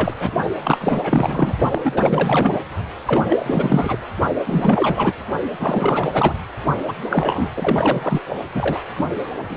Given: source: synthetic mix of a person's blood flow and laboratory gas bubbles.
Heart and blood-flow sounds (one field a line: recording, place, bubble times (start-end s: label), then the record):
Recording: Doppler ultrasound of blood flow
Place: precordium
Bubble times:
0.00-0.14 s: bubbles
0.20-0.30 s: bubbles
0.64-1.55 s: bubbles
1.71-2.59 s: bubbles
3.07-3.25 s: bubbles
3.29-3.98 s: bubbles
4.46-5.14 s: bubbles
5.59-6.34 s: bubbles
6.88-6.97 s: bubbles
7.09-7.48 s: bubbles
7.56-8.21 s: bubbles
8.54-8.80 s: bubbles
8.97-9.05 s: bubbles
9.49-9.57 s: bubbles
From the record:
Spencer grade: 4 (maximum detectable bubble signal sounding continuously throughout systole and diastole of every cardiac period, and overriding the amplitude of the normal cardiac signals)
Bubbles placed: only in the low amplitude regions of the cardiac cycle